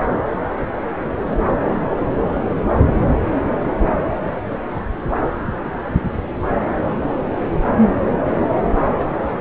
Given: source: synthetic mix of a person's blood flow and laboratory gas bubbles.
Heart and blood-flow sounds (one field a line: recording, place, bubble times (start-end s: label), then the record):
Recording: Doppler ultrasound of blood flow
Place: subclavian vein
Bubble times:
1.30-1.38 s: bubbles
From the record:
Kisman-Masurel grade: 111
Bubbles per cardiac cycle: 1 to 2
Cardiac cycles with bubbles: 1 to 10%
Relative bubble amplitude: barely perceptible (0.100 to 0.250)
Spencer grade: 1 (occasional bubble signal discernible with the cardiac motion signal, with majority of cardiac periods free of bubbles)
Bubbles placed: anywhere in the cardiac cycle